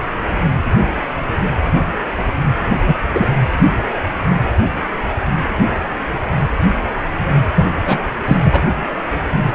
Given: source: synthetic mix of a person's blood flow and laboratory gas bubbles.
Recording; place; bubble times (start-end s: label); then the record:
Doppler ultrasound of blood flow; precordium
2.87-2.94 s: bubbles
3.13-3.28 s: bubbles
7.54-7.65 s: bubbles
7.85-7.98 s: bubbles
8.26-8.37 s: bubbles
8.43-8.72 s: bubbles
From the record:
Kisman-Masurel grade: 223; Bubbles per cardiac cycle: several, 3 to 8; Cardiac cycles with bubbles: 10 to 50%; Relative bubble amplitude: loud (0.450 to 0.775); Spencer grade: 2 (many but less than half of the cardiac periods contain bubble signals, singularly or in groups); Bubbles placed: anywhere in the cardiac cycle